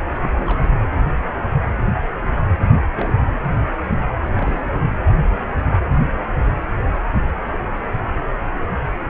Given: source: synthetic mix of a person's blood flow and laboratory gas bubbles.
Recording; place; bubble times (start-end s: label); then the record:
Doppler ultrasound of blood flow; precordium
0.23-0.29 s: bubbles
0.35-0.68 s: bubbles
2.96-3.14 s: bubbles
4.37-4.80 s: bubbles
From the record:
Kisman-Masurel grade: 221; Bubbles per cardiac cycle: several, 3 to 8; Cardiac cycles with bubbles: 10 to 50%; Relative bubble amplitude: barely perceptible (0.100 to 0.250); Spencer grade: 2 (many but less than half of the cardiac periods contain bubble signals, singularly or in groups); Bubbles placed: anywhere in the cardiac cycle